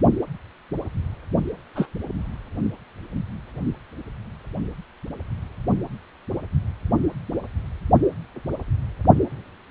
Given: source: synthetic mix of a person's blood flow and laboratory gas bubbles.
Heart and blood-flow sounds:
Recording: Doppler ultrasound of blood flow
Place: precordium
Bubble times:
1.75-1.87 s: bubbles
From the record:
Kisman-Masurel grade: 112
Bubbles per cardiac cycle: 1 to 2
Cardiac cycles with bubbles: 1 to 10%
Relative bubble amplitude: moderate (0.250 to 0.450)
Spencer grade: 1 (occasional bubble signal discernible with the cardiac motion signal, with majority of cardiac periods free of bubbles)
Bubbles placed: only in the low amplitude regions of the cardiac cycle

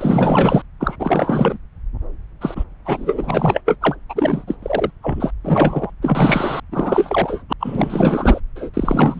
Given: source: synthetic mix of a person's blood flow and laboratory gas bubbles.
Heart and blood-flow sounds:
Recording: Doppler ultrasound of blood flow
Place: subclavian vein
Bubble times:
0.00-0.62 s: bubbles
0.80-0.96 s: bubbles
0.99-1.58 s: bubbles
2.40-2.64 s: bubbles
2.85-3.61 s: bubbles
3.66-3.77 s: bubbles
3.81-3.96 s: bubbles
4.09-4.58 s: bubbles
4.62-4.91 s: bubbles
5.02-5.31 s: bubbles
5.43-5.91 s: bubbles
6.01-6.60 s: bubbles
6.71-7.42 s: bubbles
7.49-7.53 s: bubbles
7.59-8.40 s: bubbles
8.56-8.70 s: bubbles
8.74-9.20 s: bubbles
From the record:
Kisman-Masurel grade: 444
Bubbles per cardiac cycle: continuous sound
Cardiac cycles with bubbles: 100%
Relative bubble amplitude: maximal (0.775 to 0.999)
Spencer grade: 4 (maximum detectable bubble signal sounding continuously throughout systole and diastole of every cardiac period, and overriding the amplitude of the normal cardiac signals)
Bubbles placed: anywhere in the cardiac cycle

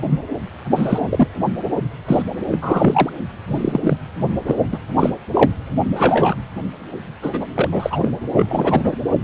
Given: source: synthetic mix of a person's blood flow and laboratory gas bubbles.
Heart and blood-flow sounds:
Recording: Doppler ultrasound of blood flow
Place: precordium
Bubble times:
0.00-0.03 s: bubbles
0.07-0.19 s: bubbles
0.76-1.28 s: bubbles
2.06-2.22 s: bubbles
2.51-2.58 s: bubbles
2.61-3.10 s: bubbles
3.47-3.98 s: bubbles
4.46-4.55 s: bubbles
4.71-4.78 s: bubbles
4.95-5.10 s: bubbles
5.33-5.51 s: bubbles
5.96-6.35 s: bubbles
7.22-7.50 s: bubbles
7.54-7.68 s: bubbles
7.71-8.12 s: bubbles
8.36-8.96 s: bubbles
From the record:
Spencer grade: 3 (all of the cardiac periods contain showers or single bubble signals, but not dominating or overriding the cardiac motion signals)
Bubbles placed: anywhere in the cardiac cycle

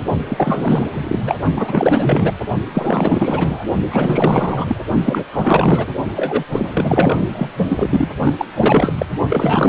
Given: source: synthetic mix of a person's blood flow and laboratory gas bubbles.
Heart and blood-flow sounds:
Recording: Doppler ultrasound of blood flow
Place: precordium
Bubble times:
0.28-0.86 s: bubbles
0.93-1.38 s: bubbles
1.55-2.33 s: bubbles
2.74-3.65 s: bubbles
3.90-4.80 s: bubbles
5.04-5.24 s: bubbles
5.33-5.86 s: bubbles
6.16-6.43 s: bubbles
6.51-6.71 s: bubbles
6.73-7.52 s: bubbles
7.69-8.08 s: bubbles
8.17-8.33 s: bubbles
8.38-8.46 s: bubbles
8.54-8.93 s: bubbles
8.98-9.06 s: bubbles
9.29-9.69 s: bubbles
From the record:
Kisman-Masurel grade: 444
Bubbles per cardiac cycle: continuous sound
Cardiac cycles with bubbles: 100%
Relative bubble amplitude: maximal (0.775 to 0.999)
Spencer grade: 4 (maximum detectable bubble signal sounding continuously throughout systole and diastole of every cardiac period, and overriding the amplitude of the normal cardiac signals)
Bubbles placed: only in the low amplitude regions of the cardiac cycle

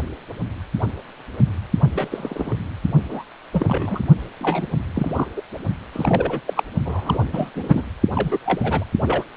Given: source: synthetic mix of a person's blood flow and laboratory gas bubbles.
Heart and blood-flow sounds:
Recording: Doppler ultrasound of blood flow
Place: precordium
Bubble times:
1.94-2.56 s: bubbles
3.09-3.23 s: bubbles
3.52-4.03 s: bubbles
4.39-4.67 s: bubbles
4.94-5.25 s: bubbles
5.36-5.42 s: bubbles
5.92-6.40 s: bubbles
6.47-6.64 s: bubbles
6.85-7.24 s: bubbles
7.33-7.51 s: bubbles
7.54-7.85 s: bubbles
8.15-8.39 s: bubbles
8.46-8.84 s: bubbles
9.01-9.23 s: bubbles
From the record:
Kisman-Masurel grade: 232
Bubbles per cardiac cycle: several, 3 to 8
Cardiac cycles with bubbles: 50 to 99%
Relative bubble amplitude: moderate (0.250 to 0.450)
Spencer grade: 3 (all of the cardiac periods contain showers or single bubble signals, but not dominating or overriding the cardiac motion signals)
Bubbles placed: only in the low amplitude regions of the cardiac cycle

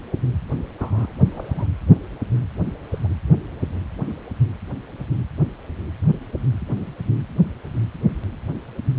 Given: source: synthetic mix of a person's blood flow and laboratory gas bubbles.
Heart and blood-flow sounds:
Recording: Doppler ultrasound of blood flow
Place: precordium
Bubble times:
0.78-1.12 s: bubbles
1.31-1.68 s: bubbles
2.91-2.99 s: bubbles
3.04-3.08 s: bubbles
From the record:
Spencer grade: 2 (many but less than half of the cardiac periods contain bubble signals, singularly or in groups)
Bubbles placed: anywhere in the cardiac cycle

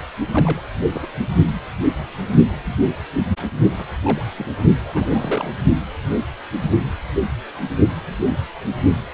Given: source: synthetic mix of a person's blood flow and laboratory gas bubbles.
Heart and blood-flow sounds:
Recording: Doppler ultrasound of blood flow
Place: precordium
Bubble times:
0.32-0.61 s: bubbles
0.93-1.06 s: bubbles
3.79-3.85 s: bubbles
4.03-4.24 s: bubbles
4.38-4.46 s: bubbles
4.84-5.50 s: bubbles
From the record:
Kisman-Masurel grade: 221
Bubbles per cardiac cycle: several, 3 to 8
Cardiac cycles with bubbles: 10 to 50%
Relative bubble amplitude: barely perceptible (0.100 to 0.250)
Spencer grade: 2 (many but less than half of the cardiac periods contain bubble signals, singularly or in groups)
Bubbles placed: only in the low amplitude regions of the cardiac cycle

